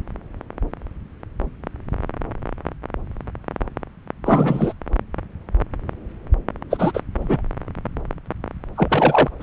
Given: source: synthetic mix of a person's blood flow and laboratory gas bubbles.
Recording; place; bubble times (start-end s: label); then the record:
Doppler ultrasound of blood flow; subclavian vein
4.25-4.73 s: bubbles
6.70-7.00 s: bubbles
7.21-7.42 s: bubbles
8.76-9.29 s: bubbles
9.39-9.43 s: bubbles
From the record:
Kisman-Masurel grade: 223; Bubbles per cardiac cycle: several, 3 to 8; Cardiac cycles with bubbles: 10 to 50%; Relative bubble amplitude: loud (0.450 to 0.775); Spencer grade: 2 (many but less than half of the cardiac periods contain bubble signals, singularly or in groups); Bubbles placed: anywhere in the cardiac cycle